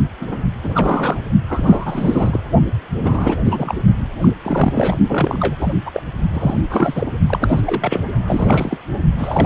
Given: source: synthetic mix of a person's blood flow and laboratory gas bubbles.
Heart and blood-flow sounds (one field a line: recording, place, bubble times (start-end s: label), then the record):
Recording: Doppler ultrasound of blood flow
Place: precordium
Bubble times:
0.20-0.42 s: bubbles
0.63-1.21 s: bubbles
1.48-2.38 s: bubbles
3.01-3.75 s: bubbles
4.21-4.31 s: bubbles
4.42-4.97 s: bubbles
5.08-5.55 s: bubbles
5.58-5.73 s: bubbles
5.85-5.91 s: bubbles
5.93-6.02 s: bubbles
6.33-6.61 s: bubbles
6.69-7.07 s: bubbles
7.26-7.61 s: bubbles
7.66-8.00 s: bubbles
8.27-8.78 s: bubbles
9.17-9.45 s: bubbles
From the record:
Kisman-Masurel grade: 343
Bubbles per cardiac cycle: rolling drumbeat, 9 or more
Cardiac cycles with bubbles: 100%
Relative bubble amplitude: loud (0.450 to 0.775)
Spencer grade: 3 (all of the cardiac periods contain showers or single bubble signals, but not dominating or overriding the cardiac motion signals)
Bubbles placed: only in the low amplitude regions of the cardiac cycle